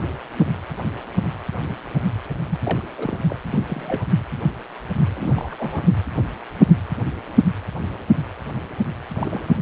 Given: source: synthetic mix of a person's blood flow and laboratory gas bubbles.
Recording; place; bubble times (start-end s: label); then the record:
Doppler ultrasound of blood flow; precordium
2.50-2.59 s: bubbles
2.64-2.82 s: bubbles
2.98-3.18 s: bubbles
3.27-3.36 s: bubbles
3.52-3.59 s: bubbles
3.67-4.08 s: bubbles
5.13-5.93 s: bubbles
9.15-9.57 s: bubbles
From the record:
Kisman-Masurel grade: 221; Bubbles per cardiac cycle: several, 3 to 8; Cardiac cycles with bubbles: 10 to 50%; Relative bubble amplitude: barely perceptible (0.100 to 0.250); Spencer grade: 2 (many but less than half of the cardiac periods contain bubble signals, singularly or in groups); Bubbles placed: anywhere in the cardiac cycle